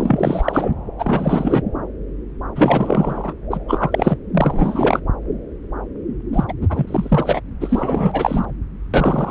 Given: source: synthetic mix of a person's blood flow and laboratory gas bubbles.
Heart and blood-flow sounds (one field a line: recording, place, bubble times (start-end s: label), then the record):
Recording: Doppler ultrasound of blood flow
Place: subclavian vein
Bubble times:
0.00-0.73 s: bubbles
0.99-1.62 s: bubbles
2.56-3.33 s: bubbles
3.50-3.58 s: bubbles
3.68-4.17 s: bubbles
4.34-5.00 s: bubbles
6.33-6.45 s: bubbles
6.48-6.54 s: bubbles
6.61-7.40 s: bubbles
7.60-8.46 s: bubbles
8.93-9.31 s: bubbles
From the record:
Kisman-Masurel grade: 333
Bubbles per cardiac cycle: rolling drumbeat, 9 or more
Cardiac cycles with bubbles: 50 to 99%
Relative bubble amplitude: loud (0.450 to 0.775)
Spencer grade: 3 (all of the cardiac periods contain showers or single bubble signals, but not dominating or overriding the cardiac motion signals)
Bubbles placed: anywhere in the cardiac cycle